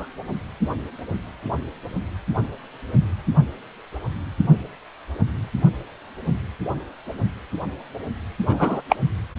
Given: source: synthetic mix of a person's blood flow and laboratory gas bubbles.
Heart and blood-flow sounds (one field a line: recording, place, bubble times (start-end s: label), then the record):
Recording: Doppler ultrasound of blood flow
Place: precordium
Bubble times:
0.00-0.06 s: bubbles
8.47-8.81 s: bubbles
8.89-8.96 s: bubbles
From the record:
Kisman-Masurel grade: 123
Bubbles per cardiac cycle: 1 to 2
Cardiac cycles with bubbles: 10 to 50%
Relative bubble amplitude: loud (0.450 to 0.775)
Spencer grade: 2 (many but less than half of the cardiac periods contain bubble signals, singularly or in groups)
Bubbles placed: only in the low amplitude regions of the cardiac cycle